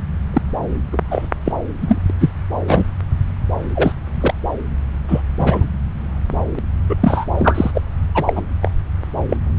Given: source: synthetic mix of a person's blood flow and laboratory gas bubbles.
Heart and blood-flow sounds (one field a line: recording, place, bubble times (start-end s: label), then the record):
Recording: Doppler ultrasound of blood flow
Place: subclavian vein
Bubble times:
0.00-0.02 s: bubbles
0.33-0.41 s: bubbles
0.92-0.97 s: bubbles
1.10-1.27 s: bubbles
1.44-1.52 s: bubbles
1.81-1.98 s: bubbles
2.10-2.12 s: bubbles
2.20-2.30 s: bubbles
2.67-2.84 s: bubbles
3.75-3.92 s: bubbles
4.15-4.34 s: bubbles
5.07-5.21 s: bubbles
5.38-5.67 s: bubbles
6.56-6.59 s: bubbles
6.89-6.96 s: bubbles
7.00-7.25 s: bubbles
7.36-7.71 s: bubbles
7.74-7.81 s: bubbles
8.14-8.41 s: bubbles
8.61-8.71 s: bubbles
9.29-9.37 s: bubbles
From the record:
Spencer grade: 3 (all of the cardiac periods contain showers or single bubble signals, but not dominating or overriding the cardiac motion signals)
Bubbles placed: anywhere in the cardiac cycle